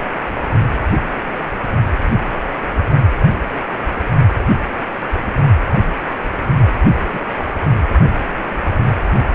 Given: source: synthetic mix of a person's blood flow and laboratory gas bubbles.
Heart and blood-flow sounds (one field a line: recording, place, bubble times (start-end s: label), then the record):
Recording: Doppler ultrasound of blood flow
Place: precordium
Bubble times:
6.97-7.22 s: bubbles
7.48-7.62 s: bubbles
From the record:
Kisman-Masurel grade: 111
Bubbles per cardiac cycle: 1 to 2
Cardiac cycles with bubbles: 1 to 10%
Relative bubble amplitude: barely perceptible (0.100 to 0.250)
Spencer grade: 1 (occasional bubble signal discernible with the cardiac motion signal, with majority of cardiac periods free of bubbles)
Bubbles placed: only in the low amplitude regions of the cardiac cycle